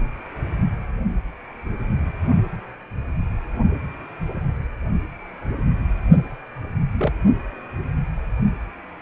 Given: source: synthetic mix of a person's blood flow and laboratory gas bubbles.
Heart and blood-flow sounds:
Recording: Doppler ultrasound of blood flow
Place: precordium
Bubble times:
6.97-7.13 s: bubbles
From the record:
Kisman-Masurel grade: 122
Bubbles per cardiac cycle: 1 to 2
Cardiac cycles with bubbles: 10 to 50%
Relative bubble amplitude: moderate (0.250 to 0.450)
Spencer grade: 2 (many but less than half of the cardiac periods contain bubble signals, singularly or in groups)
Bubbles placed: only in the low amplitude regions of the cardiac cycle

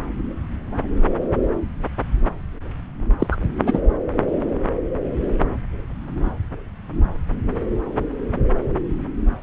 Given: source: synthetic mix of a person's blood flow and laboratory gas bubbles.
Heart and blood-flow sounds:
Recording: Doppler ultrasound of blood flow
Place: subclavian vein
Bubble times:
3.19-3.27 s: bubbles
3.31-3.37 s: bubbles
3.66-3.81 s: bubbles
From the record:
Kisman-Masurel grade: 213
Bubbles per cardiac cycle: several, 3 to 8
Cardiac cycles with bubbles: 1 to 10%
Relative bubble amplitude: loud (0.450 to 0.775)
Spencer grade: 1 (occasional bubble signal discernible with the cardiac motion signal, with majority of cardiac periods free of bubbles)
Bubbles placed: anywhere in the cardiac cycle

